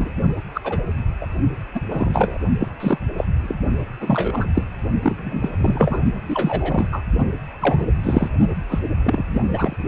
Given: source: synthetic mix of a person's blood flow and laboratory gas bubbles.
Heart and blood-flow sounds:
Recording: Doppler ultrasound of blood flow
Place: precordium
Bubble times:
0.00-0.10 s: bubbles
0.54-0.61 s: bubbles
0.64-0.82 s: bubbles
1.21-1.27 s: bubbles
1.74-1.80 s: bubbles
1.89-2.38 s: bubbles
2.60-2.68 s: bubbles
2.80-2.98 s: bubbles
3.17-3.25 s: bubbles
3.43-3.57 s: bubbles
4.00-4.49 s: bubbles
4.54-4.63 s: bubbles
5.02-6.00 s: bubbles
6.29-6.87 s: bubbles
6.92-7.02 s: bubbles
7.60-7.87 s: bubbles
8.03-8.29 s: bubbles
8.69-8.79 s: bubbles
9.04-9.48 s: bubbles
9.53-9.77 s: bubbles
From the record:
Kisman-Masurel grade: 243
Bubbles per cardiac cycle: several, 3 to 8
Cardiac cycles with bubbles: 100%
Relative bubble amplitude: loud (0.450 to 0.775)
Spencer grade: 3 (all of the cardiac periods contain showers or single bubble signals, but not dominating or overriding the cardiac motion signals)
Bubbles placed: only in the low amplitude regions of the cardiac cycle

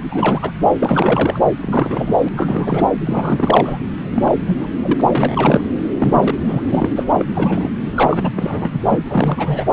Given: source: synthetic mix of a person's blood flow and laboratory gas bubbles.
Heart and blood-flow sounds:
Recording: Doppler ultrasound of blood flow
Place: subclavian vein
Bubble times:
0.11-0.51 s: bubbles
0.72-1.40 s: bubbles
1.60-2.16 s: bubbles
2.24-2.29 s: bubbles
2.33-2.88 s: bubbles
3.05-3.78 s: bubbles
4.15-4.58 s: bubbles
4.61-4.67 s: bubbles
4.83-5.02 s: bubbles
5.08-5.61 s: bubbles
5.98-6.37 s: bubbles
6.46-6.90 s: bubbles
6.96-7.04 s: bubbles
7.19-7.25 s: bubbles
7.34-7.71 s: bubbles
7.96-8.32 s: bubbles
8.35-8.79 s: bubbles
8.89-8.99 s: bubbles
9.09-9.65 s: bubbles
From the record:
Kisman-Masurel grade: 332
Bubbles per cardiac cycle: rolling drumbeat, 9 or more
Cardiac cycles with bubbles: 50 to 99%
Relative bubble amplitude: moderate (0.250 to 0.450)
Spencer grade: 3 (all of the cardiac periods contain showers or single bubble signals, but not dominating or overriding the cardiac motion signals)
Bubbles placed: anywhere in the cardiac cycle

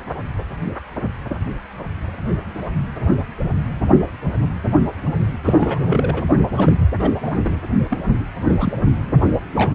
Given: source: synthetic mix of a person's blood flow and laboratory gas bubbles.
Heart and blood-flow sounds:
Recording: Doppler ultrasound of blood flow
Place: precordium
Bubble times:
5.44-6.24 s: bubbles
6.56-6.74 s: bubbles
6.99-7.11 s: bubbles
7.22-7.60 s: bubbles
7.90-7.98 s: bubbles
8.43-8.72 s: bubbles
9.56-9.75 s: bubbles
From the record:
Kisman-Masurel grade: 232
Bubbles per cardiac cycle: several, 3 to 8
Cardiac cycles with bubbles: 50 to 99%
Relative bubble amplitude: moderate (0.250 to 0.450)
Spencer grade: 3 (all of the cardiac periods contain showers or single bubble signals, but not dominating or overriding the cardiac motion signals)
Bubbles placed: only in the low amplitude regions of the cardiac cycle

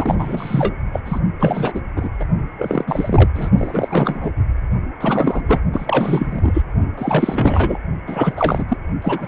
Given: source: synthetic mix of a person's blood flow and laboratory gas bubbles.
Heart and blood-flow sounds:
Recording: Doppler ultrasound of blood flow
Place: precordium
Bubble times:
0.00-0.15 s: bubbles
0.18-0.74 s: bubbles
0.93-1.00 s: bubbles
1.05-1.19 s: bubbles
1.40-1.80 s: bubbles
1.95-2.09 s: bubbles
2.19-2.26 s: bubbles
2.58-2.84 s: bubbles
2.87-3.29 s: bubbles
3.34-3.50 s: bubbles
3.58-4.32 s: bubbles
5.00-5.41 s: bubbles
5.48-5.58 s: bubbles
5.72-6.62 s: bubbles
6.97-7.78 s: bubbles
8.06-8.65 s: bubbles
8.68-8.77 s: bubbles
9.02-9.28 s: bubbles
From the record:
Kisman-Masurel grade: 343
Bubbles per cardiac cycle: rolling drumbeat, 9 or more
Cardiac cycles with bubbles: 100%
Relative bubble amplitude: loud (0.450 to 0.775)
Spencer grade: 3 (all of the cardiac periods contain showers or single bubble signals, but not dominating or overriding the cardiac motion signals)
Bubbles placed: only in the low amplitude regions of the cardiac cycle

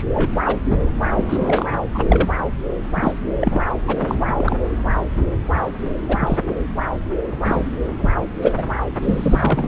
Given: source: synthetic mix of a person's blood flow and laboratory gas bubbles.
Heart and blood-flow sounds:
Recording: Doppler ultrasound of blood flow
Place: subclavian vein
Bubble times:
0.00-0.04 s: bubbles
0.14-0.32 s: bubbles
0.46-0.58 s: bubbles
0.65-0.88 s: bubbles
1.16-1.24 s: bubbles
1.29-1.38 s: bubbles
1.40-1.66 s: bubbles
1.94-2.04 s: bubbles
2.09-2.29 s: bubbles
2.95-3.12 s: bubbles
3.40-3.63 s: bubbles
3.87-4.15 s: bubbles
4.20-4.34 s: bubbles
4.38-4.57 s: bubbles
6.08-6.38 s: bubbles
7.45-7.70 s: bubbles
8.00-8.09 s: bubbles
8.41-8.52 s: bubbles
8.57-8.63 s: bubbles
9.02-9.68 s: bubbles
From the record:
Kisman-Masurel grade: 243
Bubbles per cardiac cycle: several, 3 to 8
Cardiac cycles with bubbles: 100%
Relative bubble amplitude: loud (0.450 to 0.775)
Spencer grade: 3 (all of the cardiac periods contain showers or single bubble signals, but not dominating or overriding the cardiac motion signals)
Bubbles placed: anywhere in the cardiac cycle

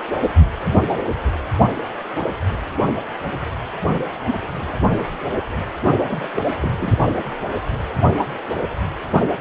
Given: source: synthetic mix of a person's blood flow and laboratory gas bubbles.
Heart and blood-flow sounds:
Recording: Doppler ultrasound of blood flow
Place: precordium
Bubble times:
6.07-6.44 s: bubbles
6.60-6.98 s: bubbles
From the record:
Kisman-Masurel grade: 211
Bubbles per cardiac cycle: several, 3 to 8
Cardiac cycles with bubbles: 1 to 10%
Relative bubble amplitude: barely perceptible (0.100 to 0.250)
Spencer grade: 1 (occasional bubble signal discernible with the cardiac motion signal, with majority of cardiac periods free of bubbles)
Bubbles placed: anywhere in the cardiac cycle

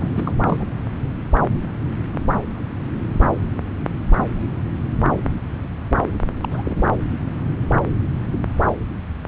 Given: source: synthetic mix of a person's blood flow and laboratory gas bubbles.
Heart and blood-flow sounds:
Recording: Doppler ultrasound of blood flow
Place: subclavian vein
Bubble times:
0.00-0.09 s: bubbles
0.13-0.32 s: bubbles
0.41-0.71 s: bubbles
6.41-6.87 s: bubbles
6.92-6.97 s: bubbles
From the record:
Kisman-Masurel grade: 221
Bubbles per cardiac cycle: several, 3 to 8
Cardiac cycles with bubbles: 10 to 50%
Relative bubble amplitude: barely perceptible (0.100 to 0.250)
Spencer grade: 2 (many but less than half of the cardiac periods contain bubble signals, singularly or in groups)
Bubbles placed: anywhere in the cardiac cycle

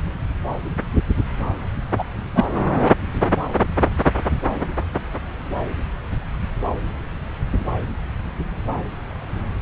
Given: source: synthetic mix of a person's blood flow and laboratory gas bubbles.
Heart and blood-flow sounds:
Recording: Doppler ultrasound of blood flow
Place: subclavian vein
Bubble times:
1.98-2.03 s: bubbles
2.35-2.44 s: bubbles
From the record:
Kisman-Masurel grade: 113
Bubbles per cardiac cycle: 1 to 2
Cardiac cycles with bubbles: 1 to 10%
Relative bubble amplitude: loud (0.450 to 0.775)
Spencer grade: 1 (occasional bubble signal discernible with the cardiac motion signal, with majority of cardiac periods free of bubbles)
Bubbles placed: anywhere in the cardiac cycle

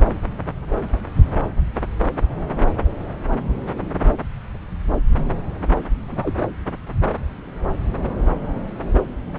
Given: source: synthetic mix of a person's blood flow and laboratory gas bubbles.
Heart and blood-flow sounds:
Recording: Doppler ultrasound of blood flow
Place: subclavian vein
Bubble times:
6.08-6.34 s: bubbles
From the record:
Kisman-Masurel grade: 221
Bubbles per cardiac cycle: several, 3 to 8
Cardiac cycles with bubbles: 10 to 50%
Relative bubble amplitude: barely perceptible (0.100 to 0.250)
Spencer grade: 2 (many but less than half of the cardiac periods contain bubble signals, singularly or in groups)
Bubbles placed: anywhere in the cardiac cycle

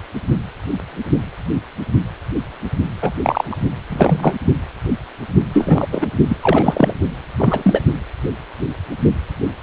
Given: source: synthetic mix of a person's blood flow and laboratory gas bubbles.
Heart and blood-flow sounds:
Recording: Doppler ultrasound of blood flow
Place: precordium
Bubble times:
3.01-3.12 s: bubbles
3.23-3.58 s: bubbles
3.90-4.35 s: bubbles
5.53-5.87 s: bubbles
5.92-6.08 s: bubbles
6.29-6.37 s: bubbles
6.42-6.94 s: bubbles
7.38-7.82 s: bubbles
From the record:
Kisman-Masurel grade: 223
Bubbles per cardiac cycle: several, 3 to 8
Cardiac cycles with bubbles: 10 to 50%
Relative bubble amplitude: loud (0.450 to 0.775)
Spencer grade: 2 (many but less than half of the cardiac periods contain bubble signals, singularly or in groups)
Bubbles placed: only in the low amplitude regions of the cardiac cycle

